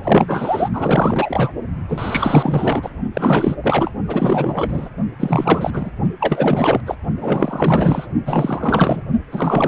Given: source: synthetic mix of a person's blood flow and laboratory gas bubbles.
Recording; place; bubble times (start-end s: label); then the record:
Doppler ultrasound of blood flow; precordium
0.00-0.69 s: bubbles
0.72-1.51 s: bubbles
1.88-2.90 s: bubbles
3.13-3.56 s: bubbles
3.63-3.90 s: bubbles
4.08-4.89 s: bubbles
5.20-5.91 s: bubbles
6.20-6.80 s: bubbles
6.86-6.95 s: bubbles
7.20-8.07 s: bubbles
8.25-9.03 s: bubbles
9.31-9.68 s: bubbles
From the record:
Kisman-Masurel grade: 444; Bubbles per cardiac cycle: continuous sound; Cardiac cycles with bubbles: 100%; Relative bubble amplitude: maximal (0.775 to 0.999); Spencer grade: 4 (maximum detectable bubble signal sounding continuously throughout systole and diastole of every cardiac period, and overriding the amplitude of the normal cardiac signals); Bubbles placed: only in the low amplitude regions of the cardiac cycle